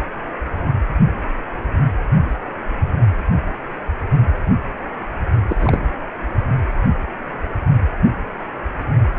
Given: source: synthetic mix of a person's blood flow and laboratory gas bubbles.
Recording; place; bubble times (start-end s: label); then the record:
Doppler ultrasound of blood flow; precordium
5.48-5.56 s: bubbles
5.59-5.79 s: bubbles
From the record:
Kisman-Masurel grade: 212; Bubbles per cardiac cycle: several, 3 to 8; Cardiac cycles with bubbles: 1 to 10%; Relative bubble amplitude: moderate (0.250 to 0.450); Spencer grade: 1 (occasional bubble signal discernible with the cardiac motion signal, with majority of cardiac periods free of bubbles); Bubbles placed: only in the low amplitude regions of the cardiac cycle